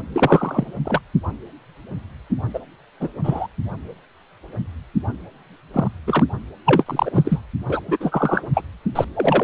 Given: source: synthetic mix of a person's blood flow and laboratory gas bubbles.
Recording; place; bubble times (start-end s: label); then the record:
Doppler ultrasound of blood flow; precordium
0.13-0.72 s: bubbles
0.85-1.01 s: bubbles
2.54-2.60 s: bubbles
3.00-3.08 s: bubbles
3.23-3.47 s: bubbles
5.73-5.88 s: bubbles
6.07-6.24 s: bubbles
6.66-7.41 s: bubbles
7.68-7.80 s: bubbles
7.88-7.97 s: bubbles
8.00-8.48 s: bubbles
8.53-8.61 s: bubbles
8.95-9.04 s: bubbles
9.14-9.44 s: bubbles
From the record:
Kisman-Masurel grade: 233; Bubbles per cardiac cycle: several, 3 to 8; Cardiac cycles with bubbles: 50 to 99%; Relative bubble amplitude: loud (0.450 to 0.775); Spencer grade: 3 (all of the cardiac periods contain showers or single bubble signals, but not dominating or overriding the cardiac motion signals); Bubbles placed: anywhere in the cardiac cycle